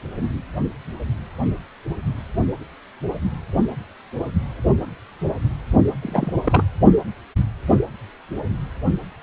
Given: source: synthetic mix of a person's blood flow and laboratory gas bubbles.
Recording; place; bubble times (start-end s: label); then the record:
Doppler ultrasound of blood flow; precordium
6.02-6.33 s: bubbles
6.46-6.63 s: bubbles
From the record:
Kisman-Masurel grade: 222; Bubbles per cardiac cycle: several, 3 to 8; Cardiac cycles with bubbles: 10 to 50%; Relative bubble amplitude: moderate (0.250 to 0.450); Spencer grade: 2 (many but less than half of the cardiac periods contain bubble signals, singularly or in groups); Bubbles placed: only in the low amplitude regions of the cardiac cycle